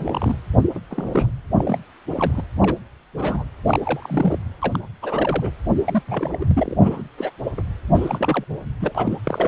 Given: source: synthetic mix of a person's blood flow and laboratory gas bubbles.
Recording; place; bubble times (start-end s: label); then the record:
Doppler ultrasound of blood flow; precordium
0.00-0.36 s: bubbles
0.74-0.79 s: bubbles
0.90-1.30 s: bubbles
1.57-1.78 s: bubbles
2.16-2.42 s: bubbles
2.60-2.77 s: bubbles
3.17-3.44 s: bubbles
3.66-3.80 s: bubbles
3.83-4.38 s: bubbles
4.62-4.79 s: bubbles
5.02-5.51 s: bubbles
5.84-6.03 s: bubbles
6.07-6.37 s: bubbles
6.40-6.75 s: bubbles
6.79-7.03 s: bubbles
7.17-7.31 s: bubbles
7.56-7.62 s: bubbles
7.94-8.45 s: bubbles
8.80-9.18 s: bubbles
9.23-9.48 s: bubbles
From the record:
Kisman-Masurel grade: 242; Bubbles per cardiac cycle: several, 3 to 8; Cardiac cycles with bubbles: 100%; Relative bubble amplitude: moderate (0.250 to 0.450); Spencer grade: 3 (all of the cardiac periods contain showers or single bubble signals, but not dominating or overriding the cardiac motion signals); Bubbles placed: anywhere in the cardiac cycle